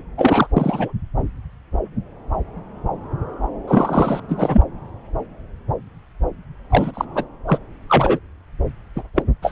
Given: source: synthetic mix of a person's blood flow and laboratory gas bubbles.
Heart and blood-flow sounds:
Doppler ultrasound of blood flow; subclavian vein
0.17-0.48 s: bubbles
0.56-0.93 s: bubbles
3.67-4.20 s: bubbles
4.28-4.62 s: bubbles
6.69-6.91 s: bubbles
6.93-7.05 s: bubbles
7.14-7.24 s: bubbles
7.47-7.59 s: bubbles
7.88-8.19 s: bubbles
8.96-9.03 s: bubbles
9.16-9.22 s: bubbles
9.42-9.52 s: bubbles
From the record:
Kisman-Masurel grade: 233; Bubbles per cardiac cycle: several, 3 to 8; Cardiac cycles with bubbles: 50 to 99%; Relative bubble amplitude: loud (0.450 to 0.775); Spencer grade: 3 (all of the cardiac periods contain showers or single bubble signals, but not dominating or overriding the cardiac motion signals); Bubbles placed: anywhere in the cardiac cycle

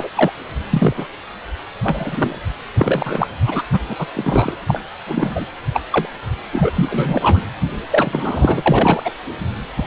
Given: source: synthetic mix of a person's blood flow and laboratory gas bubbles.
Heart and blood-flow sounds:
Doppler ultrasound of blood flow; precordium
0.00-0.09 s: bubbles
0.16-0.32 s: bubbles
0.70-0.93 s: bubbles
0.97-1.07 s: bubbles
1.83-2.39 s: bubbles
2.76-3.27 s: bubbles
3.45-3.62 s: bubbles
3.73-3.79 s: bubbles
3.89-3.96 s: bubbles
3.98-4.06 s: bubbles
4.14-4.56 s: bubbles
4.67-4.82 s: bubbles
5.06-5.46 s: bubbles
5.72-5.82 s: bubbles
5.92-6.08 s: bubbles
6.51-6.71 s: bubbles
6.76-7.41 s: bubbles
7.90-8.61 s: bubbles
8.66-9.12 s: bubbles
9.77-9.87 s: bubbles
From the record:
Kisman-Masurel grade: 243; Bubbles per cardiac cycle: several, 3 to 8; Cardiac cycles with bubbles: 100%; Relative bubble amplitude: loud (0.450 to 0.775); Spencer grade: 3 (all of the cardiac periods contain showers or single bubble signals, but not dominating or overriding the cardiac motion signals); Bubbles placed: anywhere in the cardiac cycle

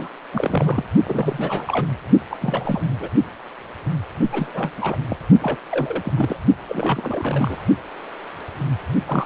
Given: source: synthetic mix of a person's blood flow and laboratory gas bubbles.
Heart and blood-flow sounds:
Doppler ultrasound of blood flow; precordium
0.00-0.10 s: bubbles
0.33-0.85 s: bubbles
1.04-1.85 s: bubbles
2.30-2.37 s: bubbles
2.41-2.96 s: bubbles
3.00-3.08 s: bubbles
4.31-4.71 s: bubbles
4.77-4.97 s: bubbles
5.09-5.17 s: bubbles
5.40-5.57 s: bubbles
5.70-6.37 s: bubbles
6.69-7.64 s: bubbles
9.07-9.25 s: bubbles
From the record:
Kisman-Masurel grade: 332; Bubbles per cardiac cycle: rolling drumbeat, 9 or more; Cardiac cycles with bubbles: 50 to 99%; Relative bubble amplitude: moderate (0.250 to 0.450); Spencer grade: 3 (all of the cardiac periods contain showers or single bubble signals, but not dominating or overriding the cardiac motion signals); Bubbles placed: only in the low amplitude regions of the cardiac cycle

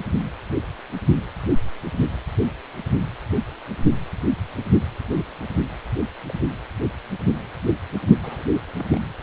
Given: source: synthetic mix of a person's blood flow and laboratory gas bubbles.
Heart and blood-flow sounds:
Doppler ultrasound of blood flow; precordium
1.16-1.21 s: bubbles
6.29-6.32 s: bubbles
8.23-8.44 s: bubbles
8.79-8.98 s: bubbles
From the record:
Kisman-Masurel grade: 121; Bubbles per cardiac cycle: 1 to 2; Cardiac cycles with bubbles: 10 to 50%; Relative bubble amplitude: barely perceptible (0.100 to 0.250); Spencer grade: 2 (many but less than half of the cardiac periods contain bubble signals, singularly or in groups); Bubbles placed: only in the low amplitude regions of the cardiac cycle

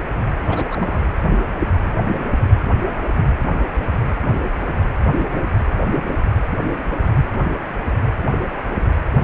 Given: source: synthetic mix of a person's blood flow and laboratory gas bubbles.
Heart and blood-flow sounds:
Doppler ultrasound of blood flow; precordium
0.46-1.00 s: bubbles
From the record:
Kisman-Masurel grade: 222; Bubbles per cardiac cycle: several, 3 to 8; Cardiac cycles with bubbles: 10 to 50%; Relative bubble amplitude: moderate (0.250 to 0.450); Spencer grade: 2 (many but less than half of the cardiac periods contain bubble signals, singularly or in groups); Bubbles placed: anywhere in the cardiac cycle

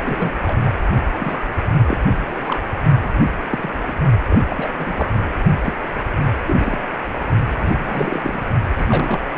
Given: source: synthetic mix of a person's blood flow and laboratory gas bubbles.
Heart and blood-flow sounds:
Doppler ultrasound of blood flow; precordium
0.00-0.33 s: bubbles
0.46-0.57 s: bubbles
0.64-0.71 s: bubbles
1.19-1.44 s: bubbles
1.86-1.97 s: bubbles
2.27-2.60 s: bubbles
3.03-3.11 s: bubbles
3.25-3.29 s: bubbles
3.50-3.70 s: bubbles
3.88-3.96 s: bubbles
4.29-4.39 s: bubbles
4.48-4.69 s: bubbles
4.78-5.09 s: bubbles
5.64-5.73 s: bubbles
6.46-6.78 s: bubbles
7.57-8.20 s: bubbles
8.23-8.41 s: bubbles
8.77-9.20 s: bubbles
9.35-9.37 s: bubbles
From the record:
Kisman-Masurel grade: 242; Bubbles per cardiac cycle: several, 3 to 8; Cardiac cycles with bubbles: 100%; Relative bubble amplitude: moderate (0.250 to 0.450); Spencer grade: 3 (all of the cardiac periods contain showers or single bubble signals, but not dominating or overriding the cardiac motion signals); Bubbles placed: only in the low amplitude regions of the cardiac cycle

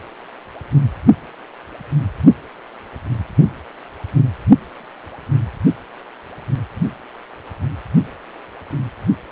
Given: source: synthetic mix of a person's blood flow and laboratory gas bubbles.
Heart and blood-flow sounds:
Doppler ultrasound of blood flow; precordium
no bubbles
From the record:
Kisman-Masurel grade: 000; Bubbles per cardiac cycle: 0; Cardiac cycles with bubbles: 0%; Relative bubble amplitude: no bubbles discernible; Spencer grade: 0 (complete lack of bubble signals)

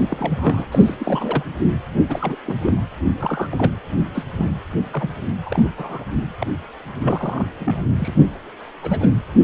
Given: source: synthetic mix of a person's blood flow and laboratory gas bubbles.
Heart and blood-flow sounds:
Doppler ultrasound of blood flow; precordium
0.00-0.66 s: bubbles
0.71-0.95 s: bubbles
0.99-1.43 s: bubbles
2.08-2.36 s: bubbles
2.45-2.56 s: bubbles
2.62-2.73 s: bubbles
3.20-3.48 s: bubbles
3.51-3.75 s: bubbles
4.14-4.25 s: bubbles
4.38-4.50 s: bubbles
4.93-5.09 s: bubbles
5.42-5.70 s: bubbles
5.78-6.04 s: bubbles
6.40-6.46 s: bubbles
7.02-7.46 s: bubbles
7.59-7.81 s: bubbles
7.98-8.12 s: bubbles
8.81-9.08 s: bubbles
From the record:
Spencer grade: 3 (all of the cardiac periods contain showers or single bubble signals, but not dominating or overriding the cardiac motion signals); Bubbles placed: anywhere in the cardiac cycle

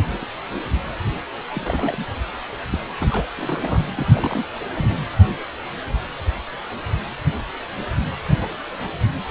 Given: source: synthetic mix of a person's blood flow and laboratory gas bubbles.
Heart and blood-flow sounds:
Doppler ultrasound of blood flow; precordium
0.00-0.17 s: bubbles
0.21-0.26 s: bubbles
1.53-2.05 s: bubbles
2.71-2.80 s: bubbles
2.95-3.25 s: bubbles
3.38-3.84 s: bubbles
3.95-4.06 s: bubbles
4.11-4.46 s: bubbles
4.56-4.65 s: bubbles
4.77-5.04 s: bubbles
From the record:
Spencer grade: 2 (many but less than half of the cardiac periods contain bubble signals, singularly or in groups); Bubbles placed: anywhere in the cardiac cycle

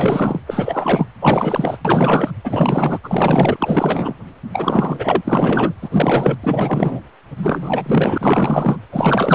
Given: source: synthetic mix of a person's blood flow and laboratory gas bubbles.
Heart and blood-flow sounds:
Doppler ultrasound of blood flow; precordium
0.00-0.40 s: bubbles
0.46-1.06 s: bubbles
1.21-1.77 s: bubbles
1.84-2.32 s: bubbles
2.44-3.00 s: bubbles
3.03-4.14 s: bubbles
4.52-5.72 s: bubbles
5.81-6.38 s: bubbles
6.43-7.00 s: bubbles
7.39-8.78 s: bubbles
8.92-9.35 s: bubbles
From the record:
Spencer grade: 4 (maximum detectable bubble signal sounding continuously throughout systole and diastole of every cardiac period, and overriding the amplitude of the normal cardiac signals); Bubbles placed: anywhere in the cardiac cycle

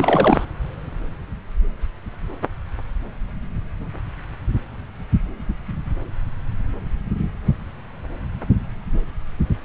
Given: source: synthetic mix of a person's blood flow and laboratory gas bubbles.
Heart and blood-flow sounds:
Doppler ultrasound of blood flow; subclavian vein
0.00-0.46 s: bubbles
From the record:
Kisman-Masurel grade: 212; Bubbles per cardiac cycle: several, 3 to 8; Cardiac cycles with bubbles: 1 to 10%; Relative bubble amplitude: moderate (0.250 to 0.450); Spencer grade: 1 (occasional bubble signal discernible with the cardiac motion signal, with majority of cardiac periods free of bubbles); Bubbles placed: anywhere in the cardiac cycle

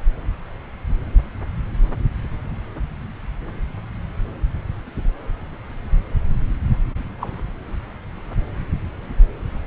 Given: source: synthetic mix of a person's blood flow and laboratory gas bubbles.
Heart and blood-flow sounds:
Doppler ultrasound of blood flow; subclavian vein
7.20-7.29 s: bubbles
From the record:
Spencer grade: 1 (occasional bubble signal discernible with the cardiac motion signal, with majority of cardiac periods free of bubbles); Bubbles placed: anywhere in the cardiac cycle

